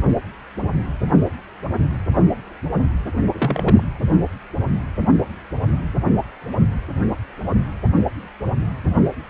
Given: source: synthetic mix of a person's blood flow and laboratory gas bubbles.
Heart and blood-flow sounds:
Doppler ultrasound of blood flow; precordium
3.33-3.83 s: bubbles
From the record:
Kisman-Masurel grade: 122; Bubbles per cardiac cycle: 1 to 2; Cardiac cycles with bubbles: 10 to 50%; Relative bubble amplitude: moderate (0.250 to 0.450); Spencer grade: 2 (many but less than half of the cardiac periods contain bubble signals, singularly or in groups); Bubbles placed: anywhere in the cardiac cycle

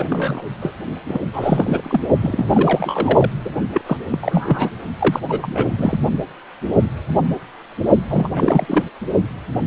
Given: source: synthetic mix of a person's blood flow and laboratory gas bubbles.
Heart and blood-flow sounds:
Doppler ultrasound of blood flow; precordium
0.00-0.05 s: bubbles
0.09-0.42 s: bubbles
0.61-0.72 s: bubbles
1.06-1.21 s: bubbles
1.33-2.01 s: bubbles
2.21-3.31 s: bubbles
3.44-3.50 s: bubbles
3.73-3.81 s: bubbles
3.86-3.97 s: bubbles
4.10-4.18 s: bubbles
4.21-4.69 s: bubbles
5.00-5.20 s: bubbles
5.27-5.68 s: bubbles
5.77-5.98 s: bubbles
8.10-8.84 s: bubbles
From the record:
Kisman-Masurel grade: 333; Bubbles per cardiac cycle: rolling drumbeat, 9 or more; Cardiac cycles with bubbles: 50 to 99%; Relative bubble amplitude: loud (0.450 to 0.775); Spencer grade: 3 (all of the cardiac periods contain showers or single bubble signals, but not dominating or overriding the cardiac motion signals); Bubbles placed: only in the low amplitude regions of the cardiac cycle

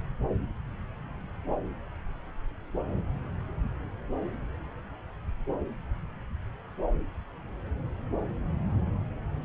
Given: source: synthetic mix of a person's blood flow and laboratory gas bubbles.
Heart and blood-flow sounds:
Doppler ultrasound of blood flow; subclavian vein
no bubbles
From the record:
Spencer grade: 0 (complete lack of bubble signals)

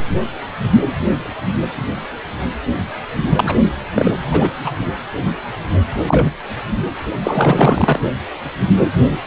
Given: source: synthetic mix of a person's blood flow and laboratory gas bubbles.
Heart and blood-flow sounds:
Doppler ultrasound of blood flow; precordium
3.23-3.56 s: bubbles
3.95-4.17 s: bubbles
4.31-4.52 s: bubbles
4.64-4.71 s: bubbles
5.91-6.29 s: bubbles
7.24-8.00 s: bubbles
From the record:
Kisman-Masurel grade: 223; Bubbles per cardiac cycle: several, 3 to 8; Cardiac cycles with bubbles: 10 to 50%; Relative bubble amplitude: loud (0.450 to 0.775); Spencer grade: 2 (many but less than half of the cardiac periods contain bubble signals, singularly or in groups); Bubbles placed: only in the low amplitude regions of the cardiac cycle

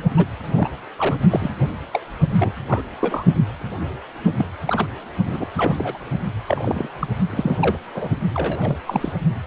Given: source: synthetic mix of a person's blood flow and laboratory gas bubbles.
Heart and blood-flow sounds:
Doppler ultrasound of blood flow; precordium
0.17-0.26 s: bubbles
0.55-0.69 s: bubbles
0.97-1.16 s: bubbles
1.30-1.51 s: bubbles
1.94-2.00 s: bubbles
2.38-2.52 s: bubbles
2.67-2.82 s: bubbles
3.01-3.25 s: bubbles
4.37-4.45 s: bubbles
4.66-4.86 s: bubbles
5.26-5.46 s: bubbles
5.54-5.98 s: bubbles
6.46-6.88 s: bubbles
7.00-7.08 s: bubbles
7.30-7.58 s: bubbles
7.61-7.78 s: bubbles
7.94-8.09 s: bubbles
8.35-8.77 s: bubbles
8.87-9.12 s: bubbles
From the record:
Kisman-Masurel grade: 242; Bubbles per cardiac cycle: several, 3 to 8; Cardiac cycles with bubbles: 100%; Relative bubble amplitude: moderate (0.250 to 0.450); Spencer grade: 3 (all of the cardiac periods contain showers or single bubble signals, but not dominating or overriding the cardiac motion signals); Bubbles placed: only in the low amplitude regions of the cardiac cycle

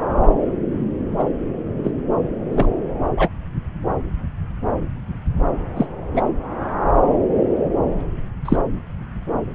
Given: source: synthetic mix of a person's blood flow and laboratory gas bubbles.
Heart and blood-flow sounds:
Doppler ultrasound of blood flow; subclavian vein
1.18-1.23 s: bubbles
1.84-1.91 s: bubbles
2.52-2.67 s: bubbles
3.17-3.29 s: bubbles
5.75-5.86 s: bubbles
6.13-6.23 s: bubbles
8.45-8.57 s: bubbles
From the record:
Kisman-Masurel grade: 123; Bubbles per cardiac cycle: 1 to 2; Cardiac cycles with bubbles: 10 to 50%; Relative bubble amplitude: loud (0.450 to 0.775); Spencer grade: 2 (many but less than half of the cardiac periods contain bubble signals, singularly or in groups); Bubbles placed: anywhere in the cardiac cycle

